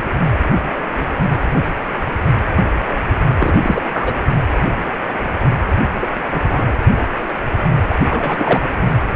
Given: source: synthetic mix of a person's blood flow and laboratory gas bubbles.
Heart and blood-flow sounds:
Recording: Doppler ultrasound of blood flow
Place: precordium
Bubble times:
3.40-3.82 s: bubbles
3.93-4.15 s: bubbles
6.01-6.07 s: bubbles
6.31-6.73 s: bubbles
7.89-7.94 s: bubbles
8.10-8.76 s: bubbles
From the record:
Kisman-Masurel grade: 222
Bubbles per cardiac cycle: several, 3 to 8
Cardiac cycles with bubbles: 10 to 50%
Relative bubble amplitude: moderate (0.250 to 0.450)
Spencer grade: 2 (many but less than half of the cardiac periods contain bubble signals, singularly or in groups)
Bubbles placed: anywhere in the cardiac cycle

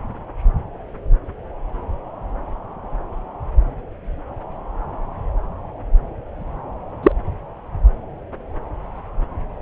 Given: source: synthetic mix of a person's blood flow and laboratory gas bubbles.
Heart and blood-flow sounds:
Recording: Doppler ultrasound of blood flow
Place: subclavian vein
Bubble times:
7.03-7.12 s: bubbles
From the record:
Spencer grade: 1 (occasional bubble signal discernible with the cardiac motion signal, with majority of cardiac periods free of bubbles)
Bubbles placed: anywhere in the cardiac cycle

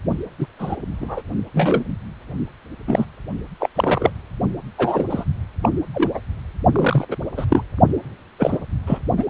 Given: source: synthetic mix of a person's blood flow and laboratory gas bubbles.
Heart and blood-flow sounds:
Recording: Doppler ultrasound of blood flow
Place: precordium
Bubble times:
0.39-0.46 s: bubbles
0.59-0.76 s: bubbles
1.01-1.22 s: bubbles
1.53-1.84 s: bubbles
2.87-3.05 s: bubbles
3.60-3.69 s: bubbles
3.75-4.11 s: bubbles
4.78-5.05 s: bubbles
5.10-5.24 s: bubbles
5.62-5.69 s: bubbles
5.94-6.10 s: bubbles
6.14-6.19 s: bubbles
6.72-7.07 s: bubbles
7.11-7.16 s: bubbles
7.37-7.46 s: bubbles
7.49-7.62 s: bubbles
8.38-8.58 s: bubbles
8.87-8.99 s: bubbles
9.17-9.25 s: bubbles
From the record:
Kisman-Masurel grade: 243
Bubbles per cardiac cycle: several, 3 to 8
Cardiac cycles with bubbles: 100%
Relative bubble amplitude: loud (0.450 to 0.775)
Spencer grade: 3 (all of the cardiac periods contain showers or single bubble signals, but not dominating or overriding the cardiac motion signals)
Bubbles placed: only in the low amplitude regions of the cardiac cycle

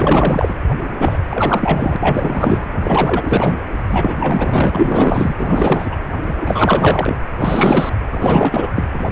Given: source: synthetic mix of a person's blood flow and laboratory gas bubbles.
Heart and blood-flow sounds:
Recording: Doppler ultrasound of blood flow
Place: precordium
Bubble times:
0.00-0.55 s: bubbles
0.99-1.19 s: bubbles
1.29-1.97 s: bubbles
1.99-2.71 s: bubbles
2.82-3.58 s: bubbles
3.88-5.35 s: bubbles
5.38-5.96 s: bubbles
6.26-6.35 s: bubbles
6.39-7.17 s: bubbles
7.39-7.89 s: bubbles
8.10-8.83 s: bubbles
8.93-9.12 s: bubbles
From the record:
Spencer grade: 4 (maximum detectable bubble signal sounding continuously throughout systole and diastole of every cardiac period, and overriding the amplitude of the normal cardiac signals)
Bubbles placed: anywhere in the cardiac cycle

